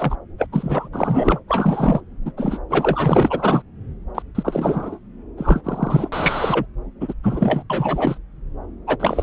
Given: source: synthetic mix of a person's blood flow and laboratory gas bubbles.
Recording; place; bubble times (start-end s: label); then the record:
Doppler ultrasound of blood flow; subclavian vein
0.00-0.16 s: bubbles
0.38-0.47 s: bubbles
0.51-0.89 s: bubbles
0.93-1.40 s: bubbles
1.48-2.00 s: bubbles
2.25-2.31 s: bubbles
2.37-2.58 s: bubbles
2.69-3.62 s: bubbles
4.15-4.23 s: bubbles
4.35-4.99 s: bubbles
5.38-5.62 s: bubbles
5.64-6.09 s: bubbles
6.12-6.66 s: bubbles
7.00-7.14 s: bubbles
7.23-7.63 s: bubbles
7.70-8.18 s: bubbles
8.87-8.96 s: bubbles
9.00-9.23 s: bubbles
From the record:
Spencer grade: 3 (all of the cardiac periods contain showers or single bubble signals, but not dominating or overriding the cardiac motion signals); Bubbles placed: anywhere in the cardiac cycle